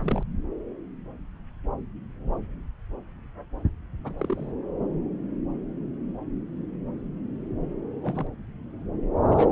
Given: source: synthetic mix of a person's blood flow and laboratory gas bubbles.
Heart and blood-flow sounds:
Doppler ultrasound of blood flow; subclavian vein
0.01-0.23 s: bubbles
4.04-4.14 s: bubbles
4.19-4.51 s: bubbles
8.03-8.27 s: bubbles
9.24-9.49 s: bubbles
From the record:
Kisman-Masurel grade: 221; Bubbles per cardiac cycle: several, 3 to 8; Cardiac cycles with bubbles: 10 to 50%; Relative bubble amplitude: barely perceptible (0.100 to 0.250); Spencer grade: 2 (many but less than half of the cardiac periods contain bubble signals, singularly or in groups); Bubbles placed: anywhere in the cardiac cycle

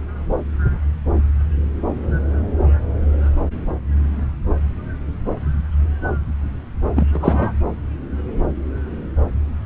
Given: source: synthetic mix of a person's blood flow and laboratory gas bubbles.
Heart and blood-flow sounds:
Doppler ultrasound of blood flow; subclavian vein
6.96-7.06 s: bubbles
7.13-7.52 s: bubbles
From the record:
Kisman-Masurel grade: 213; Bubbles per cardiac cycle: several, 3 to 8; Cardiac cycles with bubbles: 1 to 10%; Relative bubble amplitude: loud (0.450 to 0.775); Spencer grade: 1 (occasional bubble signal discernible with the cardiac motion signal, with majority of cardiac periods free of bubbles); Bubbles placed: anywhere in the cardiac cycle

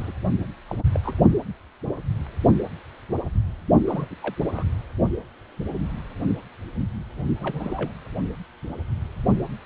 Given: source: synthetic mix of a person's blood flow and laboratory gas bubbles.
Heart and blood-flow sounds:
Doppler ultrasound of blood flow; precordium
0.00-0.12 s: bubbles
0.68-0.83 s: bubbles
0.92-1.00 s: bubbles
1.03-1.17 s: bubbles
3.87-4.15 s: bubbles
4.22-4.34 s: bubbles
4.54-4.63 s: bubbles
7.38-7.92 s: bubbles
From the record:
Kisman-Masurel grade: 221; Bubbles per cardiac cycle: several, 3 to 8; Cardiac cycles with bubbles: 10 to 50%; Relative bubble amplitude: barely perceptible (0.100 to 0.250); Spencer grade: 2 (many but less than half of the cardiac periods contain bubble signals, singularly or in groups); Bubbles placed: only in the low amplitude regions of the cardiac cycle

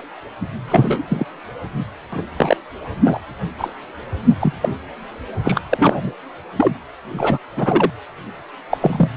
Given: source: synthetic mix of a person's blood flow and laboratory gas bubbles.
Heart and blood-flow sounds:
Doppler ultrasound of blood flow; precordium
0.00-0.06 s: bubbles
0.67-1.01 s: bubbles
1.09-1.25 s: bubbles
2.12-2.22 s: bubbles
2.37-2.57 s: bubbles
3.04-3.20 s: bubbles
3.58-3.75 s: bubbles
4.40-4.53 s: bubbles
4.61-4.69 s: bubbles
5.44-5.61 s: bubbles
5.69-6.14 s: bubbles
6.58-6.75 s: bubbles
7.12-7.38 s: bubbles
7.56-7.90 s: bubbles
8.70-8.78 s: bubbles
8.81-9.09 s: bubbles
From the record:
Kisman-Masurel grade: 243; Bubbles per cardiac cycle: several, 3 to 8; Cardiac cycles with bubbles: 100%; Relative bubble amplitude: loud (0.450 to 0.775); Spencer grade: 3 (all of the cardiac periods contain showers or single bubble signals, but not dominating or overriding the cardiac motion signals); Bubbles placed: anywhere in the cardiac cycle

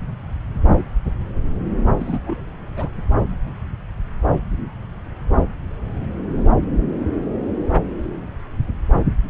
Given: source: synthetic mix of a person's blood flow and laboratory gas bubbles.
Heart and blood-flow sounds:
Doppler ultrasound of blood flow; subclavian vein
1.99-2.19 s: bubbles
2.26-2.51 s: bubbles
2.76-2.88 s: bubbles
From the record:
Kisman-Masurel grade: 211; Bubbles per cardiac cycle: several, 3 to 8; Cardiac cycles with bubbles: 1 to 10%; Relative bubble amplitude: barely perceptible (0.100 to 0.250); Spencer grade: 1 (occasional bubble signal discernible with the cardiac motion signal, with majority of cardiac periods free of bubbles); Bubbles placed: anywhere in the cardiac cycle

